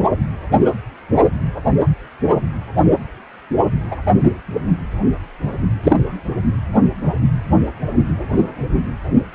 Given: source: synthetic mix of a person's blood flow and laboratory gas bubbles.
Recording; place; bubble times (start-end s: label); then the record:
Doppler ultrasound of blood flow; precordium
3.91-3.96 s: bubbles
5.83-5.96 s: bubbles
From the record:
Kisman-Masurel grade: 123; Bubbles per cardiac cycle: 1 to 2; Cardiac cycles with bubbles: 10 to 50%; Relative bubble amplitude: loud (0.450 to 0.775); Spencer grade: 2 (many but less than half of the cardiac periods contain bubble signals, singularly or in groups); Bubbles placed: only in the low amplitude regions of the cardiac cycle